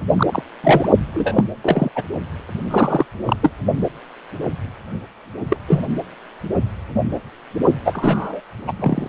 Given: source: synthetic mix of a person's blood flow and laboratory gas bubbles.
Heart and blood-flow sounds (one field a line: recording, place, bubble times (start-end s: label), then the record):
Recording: Doppler ultrasound of blood flow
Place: precordium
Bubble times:
0.17-0.42 s: bubbles
0.64-0.89 s: bubbles
1.14-1.44 s: bubbles
1.62-1.90 s: bubbles
1.95-2.04 s: bubbles
2.71-3.06 s: bubbles
3.25-3.37 s: bubbles
3.42-3.50 s: bubbles
5.48-5.56 s: bubbles
5.67-5.83 s: bubbles
7.84-8.41 s: bubbles
8.67-8.71 s: bubbles
8.79-9.07 s: bubbles
From the record:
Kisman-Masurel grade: 233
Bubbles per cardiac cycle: several, 3 to 8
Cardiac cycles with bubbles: 50 to 99%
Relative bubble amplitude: loud (0.450 to 0.775)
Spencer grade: 3 (all of the cardiac periods contain showers or single bubble signals, but not dominating or overriding the cardiac motion signals)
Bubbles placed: only in the low amplitude regions of the cardiac cycle